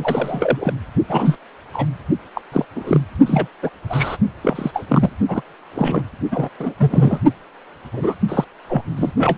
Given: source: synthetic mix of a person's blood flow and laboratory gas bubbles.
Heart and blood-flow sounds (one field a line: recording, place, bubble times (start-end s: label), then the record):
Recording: Doppler ultrasound of blood flow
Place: precordium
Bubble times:
0.00-0.72 s: bubbles
1.08-1.38 s: bubbles
1.74-1.86 s: bubbles
2.34-2.42 s: bubbles
2.52-2.65 s: bubbles
2.75-3.00 s: bubbles
3.26-3.48 s: bubbles
3.62-3.70 s: bubbles
3.89-4.17 s: bubbles
4.42-4.71 s: bubbles
4.74-5.09 s: bubbles
5.28-5.42 s: bubbles
5.72-6.04 s: bubbles
6.31-6.49 s: bubbles
6.59-6.74 s: bubbles
6.79-7.19 s: bubbles
7.93-8.15 s: bubbles
8.28-8.45 s: bubbles
8.69-8.83 s: bubbles
8.96-9.12 s: bubbles
9.18-9.38 s: bubbles
From the record:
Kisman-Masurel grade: 242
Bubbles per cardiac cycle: several, 3 to 8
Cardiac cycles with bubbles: 100%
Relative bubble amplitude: moderate (0.250 to 0.450)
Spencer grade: 3 (all of the cardiac periods contain showers or single bubble signals, but not dominating or overriding the cardiac motion signals)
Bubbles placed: only in the low amplitude regions of the cardiac cycle